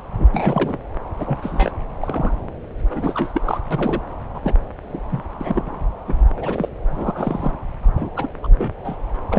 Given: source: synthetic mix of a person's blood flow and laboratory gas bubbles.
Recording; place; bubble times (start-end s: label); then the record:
Doppler ultrasound of blood flow; subclavian vein
0.00-0.02 s: bubbles
0.17-0.27 s: bubbles
0.34-0.78 s: bubbles
1.17-1.38 s: bubbles
1.42-1.71 s: bubbles
2.01-2.35 s: bubbles
2.90-3.60 s: bubbles
3.70-4.00 s: bubbles
4.34-4.53 s: bubbles
4.84-5.04 s: bubbles
5.11-5.24 s: bubbles
5.41-5.75 s: bubbles
6.08-6.14 s: bubbles
6.36-6.69 s: bubbles
6.90-7.55 s: bubbles
7.96-8.12 s: bubbles
8.16-8.28 s: bubbles
8.43-8.47 s: bubbles
8.58-8.71 s: bubbles
8.85-8.96 s: bubbles
9.29-9.39 s: bubbles
From the record:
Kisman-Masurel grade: 232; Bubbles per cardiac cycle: several, 3 to 8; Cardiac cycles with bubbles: 50 to 99%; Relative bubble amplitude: moderate (0.250 to 0.450); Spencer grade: 3 (all of the cardiac periods contain showers or single bubble signals, but not dominating or overriding the cardiac motion signals); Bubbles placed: anywhere in the cardiac cycle